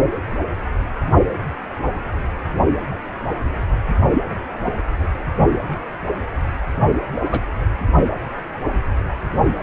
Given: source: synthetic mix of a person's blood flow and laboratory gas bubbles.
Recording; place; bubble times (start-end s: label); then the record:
Doppler ultrasound of blood flow; precordium
7.31-7.40 s: bubbles
From the record:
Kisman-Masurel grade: 123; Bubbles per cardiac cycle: 1 to 2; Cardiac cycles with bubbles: 10 to 50%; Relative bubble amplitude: loud (0.450 to 0.775); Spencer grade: 2 (many but less than half of the cardiac periods contain bubble signals, singularly or in groups); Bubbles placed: only in the low amplitude regions of the cardiac cycle